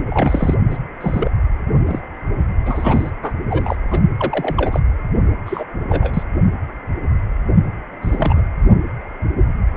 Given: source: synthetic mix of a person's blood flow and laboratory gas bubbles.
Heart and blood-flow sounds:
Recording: Doppler ultrasound of blood flow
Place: precordium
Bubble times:
0.10-0.55 s: bubbles
0.70-0.77 s: bubbles
1.00-1.31 s: bubbles
1.86-2.00 s: bubbles
2.65-3.10 s: bubbles
3.23-3.33 s: bubbles
3.49-3.76 s: bubbles
3.90-4.02 s: bubbles
4.18-4.80 s: bubbles
5.46-5.64 s: bubbles
5.90-6.24 s: bubbles
8.02-8.42 s: bubbles
From the record:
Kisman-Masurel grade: 232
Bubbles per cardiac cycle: several, 3 to 8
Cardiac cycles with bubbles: 50 to 99%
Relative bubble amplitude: moderate (0.250 to 0.450)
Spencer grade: 3 (all of the cardiac periods contain showers or single bubble signals, but not dominating or overriding the cardiac motion signals)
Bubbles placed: only in the low amplitude regions of the cardiac cycle

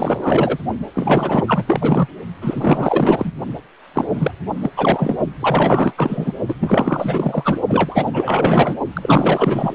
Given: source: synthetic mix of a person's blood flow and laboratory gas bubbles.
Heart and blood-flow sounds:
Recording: Doppler ultrasound of blood flow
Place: precordium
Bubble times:
0.00-0.58 s: bubbles
0.94-1.44 s: bubbles
1.47-1.65 s: bubbles
1.67-2.07 s: bubbles
2.41-3.33 s: bubbles
3.94-4.32 s: bubbles
4.62-4.70 s: bubbles
4.76-5.16 s: bubbles
5.41-5.93 s: bubbles
5.96-6.33 s: bubbles
6.47-6.54 s: bubbles
6.60-7.60 s: bubbles
7.68-8.77 s: bubbles
8.93-9.75 s: bubbles
From the record:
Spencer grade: 4 (maximum detectable bubble signal sounding continuously throughout systole and diastole of every cardiac period, and overriding the amplitude of the normal cardiac signals)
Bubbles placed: only in the low amplitude regions of the cardiac cycle

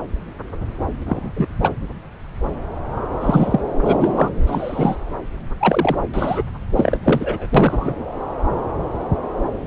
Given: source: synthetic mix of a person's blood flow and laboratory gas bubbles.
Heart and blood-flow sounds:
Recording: Doppler ultrasound of blood flow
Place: subclavian vein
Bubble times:
1.05-1.32 s: bubbles
1.36-1.47 s: bubbles
1.59-1.71 s: bubbles
3.20-3.60 s: bubbles
3.81-4.30 s: bubbles
4.46-4.96 s: bubbles
5.59-5.98 s: bubbles
6.14-6.44 s: bubbles
6.76-6.99 s: bubbles
7.02-7.48 s: bubbles
7.55-7.94 s: bubbles
From the record:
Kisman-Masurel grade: 233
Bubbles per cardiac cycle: several, 3 to 8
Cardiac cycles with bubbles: 50 to 99%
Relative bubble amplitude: loud (0.450 to 0.775)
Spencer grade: 3 (all of the cardiac periods contain showers or single bubble signals, but not dominating or overriding the cardiac motion signals)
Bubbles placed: anywhere in the cardiac cycle

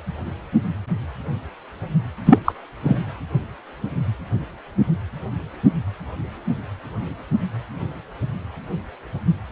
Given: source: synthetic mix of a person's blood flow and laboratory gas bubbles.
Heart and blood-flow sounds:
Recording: Doppler ultrasound of blood flow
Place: precordium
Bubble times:
2.25-2.38 s: bubbles
2.44-2.52 s: bubbles
2.83-3.00 s: bubbles
From the record:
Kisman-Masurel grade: 213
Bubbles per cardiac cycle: several, 3 to 8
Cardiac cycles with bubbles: 1 to 10%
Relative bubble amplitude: loud (0.450 to 0.775)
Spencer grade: 1 (occasional bubble signal discernible with the cardiac motion signal, with majority of cardiac periods free of bubbles)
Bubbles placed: anywhere in the cardiac cycle

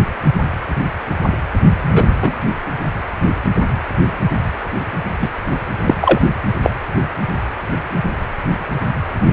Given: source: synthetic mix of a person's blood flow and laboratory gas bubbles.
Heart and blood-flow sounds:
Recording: Doppler ultrasound of blood flow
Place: precordium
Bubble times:
1.81-2.08 s: bubbles
2.20-2.35 s: bubbles
5.21-5.29 s: bubbles
5.84-5.95 s: bubbles
6.00-6.20 s: bubbles
6.62-6.70 s: bubbles
From the record:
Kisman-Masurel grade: 123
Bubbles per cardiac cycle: 1 to 2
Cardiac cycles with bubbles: 10 to 50%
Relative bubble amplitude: loud (0.450 to 0.775)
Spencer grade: 2 (many but less than half of the cardiac periods contain bubble signals, singularly or in groups)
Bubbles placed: anywhere in the cardiac cycle

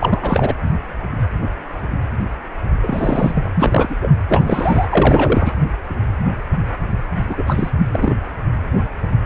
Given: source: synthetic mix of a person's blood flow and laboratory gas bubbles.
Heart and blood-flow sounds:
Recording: Doppler ultrasound of blood flow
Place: precordium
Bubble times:
0.00-0.54 s: bubbles
2.83-3.50 s: bubbles
3.55-3.96 s: bubbles
4.02-4.10 s: bubbles
4.28-4.86 s: bubbles
4.89-5.52 s: bubbles
7.29-7.70 s: bubbles
7.78-7.87 s: bubbles
7.92-8.16 s: bubbles
From the record:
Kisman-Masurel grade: 333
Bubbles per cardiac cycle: rolling drumbeat, 9 or more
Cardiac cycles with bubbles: 50 to 99%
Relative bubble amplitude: loud (0.450 to 0.775)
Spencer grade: 3 (all of the cardiac periods contain showers or single bubble signals, but not dominating or overriding the cardiac motion signals)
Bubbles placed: anywhere in the cardiac cycle

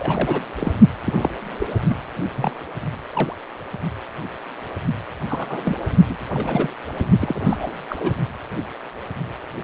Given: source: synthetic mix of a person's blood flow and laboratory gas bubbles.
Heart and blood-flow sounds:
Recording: Doppler ultrasound of blood flow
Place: precordium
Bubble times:
0.00-0.43 s: bubbles
0.59-0.72 s: bubbles
1.04-1.31 s: bubbles
1.58-1.67 s: bubbles
1.88-1.95 s: bubbles
2.36-2.51 s: bubbles
3.13-3.35 s: bubbles
5.29-5.76 s: bubbles
6.07-6.16 s: bubbles
6.32-6.70 s: bubbles
6.99-7.04 s: bubbles
7.20-7.71 s: bubbles
7.89-7.97 s: bubbles
8.00-8.14 s: bubbles
From the record:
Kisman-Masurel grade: 232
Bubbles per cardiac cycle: several, 3 to 8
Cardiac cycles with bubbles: 50 to 99%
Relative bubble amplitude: moderate (0.250 to 0.450)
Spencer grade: 3 (all of the cardiac periods contain showers or single bubble signals, but not dominating or overriding the cardiac motion signals)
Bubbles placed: only in the low amplitude regions of the cardiac cycle

